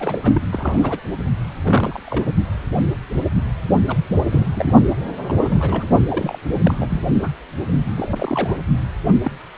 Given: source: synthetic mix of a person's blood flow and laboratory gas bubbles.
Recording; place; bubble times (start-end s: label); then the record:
Doppler ultrasound of blood flow; precordium
0.00-0.18 s: bubbles
0.21-0.42 s: bubbles
0.51-1.01 s: bubbles
1.64-2.00 s: bubbles
2.04-2.30 s: bubbles
3.88-3.98 s: bubbles
4.30-4.46 s: bubbles
4.54-4.75 s: bubbles
5.25-5.87 s: bubbles
6.08-6.38 s: bubbles
6.62-6.74 s: bubbles
6.79-6.88 s: bubbles
6.90-7.01 s: bubbles
7.21-7.30 s: bubbles
7.97-8.54 s: bubbles
9.23-9.31 s: bubbles
From the record:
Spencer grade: 3 (all of the cardiac periods contain showers or single bubble signals, but not dominating or overriding the cardiac motion signals); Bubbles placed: only in the low amplitude regions of the cardiac cycle